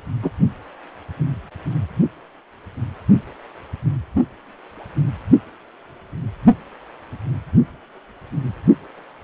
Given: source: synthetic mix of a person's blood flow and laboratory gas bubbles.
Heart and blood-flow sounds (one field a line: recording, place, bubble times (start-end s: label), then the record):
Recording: Doppler ultrasound of blood flow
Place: precordium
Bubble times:
0.22-0.31 s: bubbles
From the record:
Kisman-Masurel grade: 112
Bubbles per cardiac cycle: 1 to 2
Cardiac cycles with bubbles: 1 to 10%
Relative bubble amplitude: moderate (0.250 to 0.450)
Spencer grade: 1 (occasional bubble signal discernible with the cardiac motion signal, with majority of cardiac periods free of bubbles)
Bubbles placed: anywhere in the cardiac cycle